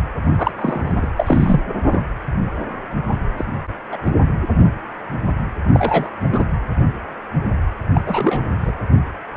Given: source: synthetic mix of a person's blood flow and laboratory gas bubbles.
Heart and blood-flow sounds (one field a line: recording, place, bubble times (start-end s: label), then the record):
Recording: Doppler ultrasound of blood flow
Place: precordium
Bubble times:
0.21-0.53 s: bubbles
0.56-1.07 s: bubbles
1.17-1.60 s: bubbles
1.90-2.02 s: bubbles
3.38-3.45 s: bubbles
3.92-3.97 s: bubbles
4.04-4.12 s: bubbles
5.74-6.10 s: bubbles
6.32-6.44 s: bubbles
7.94-8.01 s: bubbles
8.06-8.52 s: bubbles
8.60-8.72 s: bubbles
From the record:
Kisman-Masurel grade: 232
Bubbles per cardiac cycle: several, 3 to 8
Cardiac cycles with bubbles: 50 to 99%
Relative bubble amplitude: moderate (0.250 to 0.450)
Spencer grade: 3 (all of the cardiac periods contain showers or single bubble signals, but not dominating or overriding the cardiac motion signals)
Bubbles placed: anywhere in the cardiac cycle